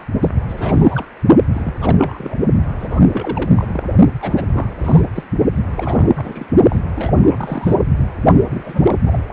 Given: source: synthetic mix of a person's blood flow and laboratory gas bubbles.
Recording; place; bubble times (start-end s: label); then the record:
Doppler ultrasound of blood flow; precordium
0.00-0.04 s: bubbles
0.21-0.33 s: bubbles
0.48-1.05 s: bubbles
1.53-1.74 s: bubbles
1.80-2.35 s: bubbles
2.79-3.00 s: bubbles
3.12-3.51 s: bubbles
3.57-3.84 s: bubbles
4.20-4.50 s: bubbles
4.53-4.67 s: bubbles
4.78-5.06 s: bubbles
5.14-5.24 s: bubbles
5.75-6.09 s: bubbles
6.17-6.46 s: bubbles
6.69-6.79 s: bubbles
6.96-7.76 s: bubbles
7.96-8.09 s: bubbles
8.50-8.96 s: bubbles
9.06-9.24 s: bubbles
From the record:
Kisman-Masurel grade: 342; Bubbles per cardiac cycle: rolling drumbeat, 9 or more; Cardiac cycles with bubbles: 100%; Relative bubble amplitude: moderate (0.250 to 0.450); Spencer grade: 3 (all of the cardiac periods contain showers or single bubble signals, but not dominating or overriding the cardiac motion signals); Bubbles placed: only in the low amplitude regions of the cardiac cycle